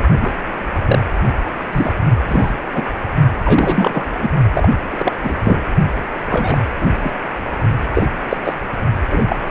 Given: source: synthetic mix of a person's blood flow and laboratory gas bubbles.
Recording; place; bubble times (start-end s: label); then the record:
Doppler ultrasound of blood flow; precordium
0.21-0.32 s: bubbles
0.86-0.99 s: bubbles
1.72-1.93 s: bubbles
2.28-2.53 s: bubbles
2.74-2.85 s: bubbles
3.45-4.04 s: bubbles
4.18-4.29 s: bubbles
4.54-4.69 s: bubbles
4.80-5.35 s: bubbles
5.44-5.62 s: bubbles
6.30-6.58 s: bubbles
6.80-6.92 s: bubbles
7.03-7.12 s: bubbles
7.94-8.06 s: bubbles
8.29-8.37 s: bubbles
8.44-8.55 s: bubbles
9.09-9.25 s: bubbles
9.29-9.36 s: bubbles
9.47-9.50 s: bubbles
From the record:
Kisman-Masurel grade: 233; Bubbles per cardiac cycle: several, 3 to 8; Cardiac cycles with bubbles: 50 to 99%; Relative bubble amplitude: loud (0.450 to 0.775); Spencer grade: 3 (all of the cardiac periods contain showers or single bubble signals, but not dominating or overriding the cardiac motion signals); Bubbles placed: only in the low amplitude regions of the cardiac cycle